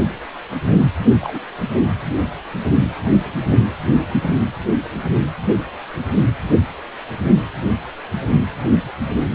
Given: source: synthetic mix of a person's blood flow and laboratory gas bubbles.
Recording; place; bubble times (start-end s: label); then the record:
Doppler ultrasound of blood flow; precordium
1.21-1.39 s: bubbles
From the record:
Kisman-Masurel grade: 112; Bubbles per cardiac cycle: 1 to 2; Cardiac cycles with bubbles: 1 to 10%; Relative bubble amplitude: moderate (0.250 to 0.450); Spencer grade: 1 (occasional bubble signal discernible with the cardiac motion signal, with majority of cardiac periods free of bubbles); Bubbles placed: only in the low amplitude regions of the cardiac cycle